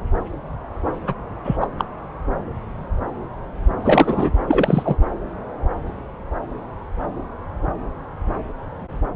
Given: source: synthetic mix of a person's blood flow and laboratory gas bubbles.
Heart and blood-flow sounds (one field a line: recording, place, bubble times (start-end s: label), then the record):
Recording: Doppler ultrasound of blood flow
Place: subclavian vein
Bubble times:
1.06-1.15 s: bubbles
1.44-1.56 s: bubbles
1.60-1.68 s: bubbles
1.77-1.85 s: bubbles
3.81-4.30 s: bubbles
4.47-4.96 s: bubbles
From the record:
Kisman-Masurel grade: 223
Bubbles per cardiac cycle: several, 3 to 8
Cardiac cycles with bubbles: 10 to 50%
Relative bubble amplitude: loud (0.450 to 0.775)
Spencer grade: 2 (many but less than half of the cardiac periods contain bubble signals, singularly or in groups)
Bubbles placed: anywhere in the cardiac cycle